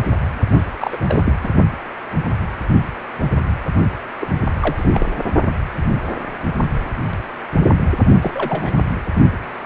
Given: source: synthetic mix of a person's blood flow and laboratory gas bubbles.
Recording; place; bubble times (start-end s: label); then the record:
Doppler ultrasound of blood flow; precordium
0.51-0.61 s: bubbles
0.78-0.98 s: bubbles
1.07-1.23 s: bubbles
1.25-1.34 s: bubbles
1.44-1.50 s: bubbles
4.19-4.28 s: bubbles
4.62-5.24 s: bubbles
8.22-8.74 s: bubbles
From the record:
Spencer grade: 2 (many but less than half of the cardiac periods contain bubble signals, singularly or in groups); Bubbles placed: only in the low amplitude regions of the cardiac cycle